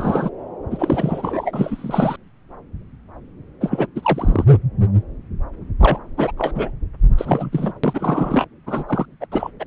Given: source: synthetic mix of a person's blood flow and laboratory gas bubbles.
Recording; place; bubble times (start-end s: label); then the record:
Doppler ultrasound of blood flow; subclavian vein
0.00-0.30 s: bubbles
0.70-2.16 s: bubbles
3.60-3.86 s: bubbles
3.95-4.45 s: bubbles
4.47-4.58 s: bubbles
5.79-5.99 s: bubbles
6.17-6.32 s: bubbles
6.37-6.71 s: bubbles
7.17-7.72 s: bubbles
7.83-8.45 s: bubbles
8.67-8.84 s: bubbles
8.88-9.06 s: bubbles
9.21-9.26 s: bubbles
9.32-9.51 s: bubbles
9.60-9.64 s: bubbles
From the record:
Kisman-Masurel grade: 333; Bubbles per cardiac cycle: rolling drumbeat, 9 or more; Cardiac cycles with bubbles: 50 to 99%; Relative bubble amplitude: loud (0.450 to 0.775); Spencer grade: 3 (all of the cardiac periods contain showers or single bubble signals, but not dominating or overriding the cardiac motion signals); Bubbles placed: anywhere in the cardiac cycle